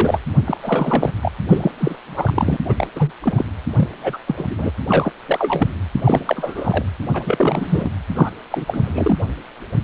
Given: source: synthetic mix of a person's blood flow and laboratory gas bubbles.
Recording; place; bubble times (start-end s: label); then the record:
Doppler ultrasound of blood flow; precordium
0.00-0.19 s: bubbles
0.45-0.57 s: bubbles
0.62-1.11 s: bubbles
1.22-1.31 s: bubbles
1.48-1.71 s: bubbles
1.79-1.96 s: bubbles
2.04-2.56 s: bubbles
2.65-2.74 s: bubbles
2.77-2.88 s: bubbles
2.96-3.12 s: bubbles
3.22-3.46 s: bubbles
3.77-3.89 s: bubbles
4.03-4.17 s: bubbles
4.26-4.46 s: bubbles
4.50-4.55 s: bubbles
4.57-4.71 s: bubbles
4.87-5.11 s: bubbles
5.26-5.67 s: bubbles
6.05-6.84 s: bubbles
7.13-7.91 s: bubbles
8.14-8.30 s: bubbles
8.51-8.65 s: bubbles
8.68-9.17 s: bubbles
From the record:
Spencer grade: 3 (all of the cardiac periods contain showers or single bubble signals, but not dominating or overriding the cardiac motion signals); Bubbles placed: anywhere in the cardiac cycle